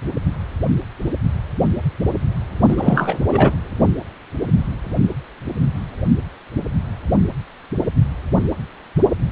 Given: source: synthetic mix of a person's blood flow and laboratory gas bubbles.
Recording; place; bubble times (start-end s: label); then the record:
Doppler ultrasound of blood flow; precordium
2.68-3.16 s: bubbles
3.27-3.52 s: bubbles
From the record:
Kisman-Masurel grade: 213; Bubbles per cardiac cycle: several, 3 to 8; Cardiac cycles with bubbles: 1 to 10%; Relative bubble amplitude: loud (0.450 to 0.775); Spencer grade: 1 (occasional bubble signal discernible with the cardiac motion signal, with majority of cardiac periods free of bubbles); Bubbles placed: anywhere in the cardiac cycle